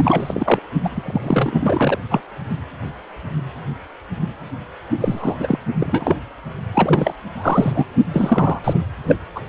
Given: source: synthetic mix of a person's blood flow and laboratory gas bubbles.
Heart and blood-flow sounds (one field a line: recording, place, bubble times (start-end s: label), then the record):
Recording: Doppler ultrasound of blood flow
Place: precordium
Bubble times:
0.00-0.59 s: bubbles
0.83-1.98 s: bubbles
2.10-2.21 s: bubbles
5.00-5.59 s: bubbles
5.77-6.16 s: bubbles
6.73-7.13 s: bubbles
7.36-7.85 s: bubbles
8.13-8.59 s: bubbles
8.64-8.84 s: bubbles
9.07-9.16 s: bubbles
9.35-9.42 s: bubbles
From the record:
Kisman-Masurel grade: 332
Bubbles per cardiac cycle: rolling drumbeat, 9 or more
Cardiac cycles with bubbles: 50 to 99%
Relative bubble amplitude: moderate (0.250 to 0.450)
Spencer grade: 3 (all of the cardiac periods contain showers or single bubble signals, but not dominating or overriding the cardiac motion signals)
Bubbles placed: only in the low amplitude regions of the cardiac cycle